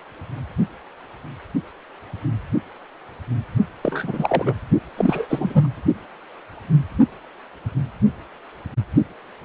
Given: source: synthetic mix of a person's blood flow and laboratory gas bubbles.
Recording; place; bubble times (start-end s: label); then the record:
Doppler ultrasound of blood flow; precordium
3.81-4.55 s: bubbles
4.97-5.67 s: bubbles
From the record:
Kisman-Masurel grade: 222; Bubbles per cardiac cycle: several, 3 to 8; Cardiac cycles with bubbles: 10 to 50%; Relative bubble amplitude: moderate (0.250 to 0.450); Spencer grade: 2 (many but less than half of the cardiac periods contain bubble signals, singularly or in groups); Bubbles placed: only in the low amplitude regions of the cardiac cycle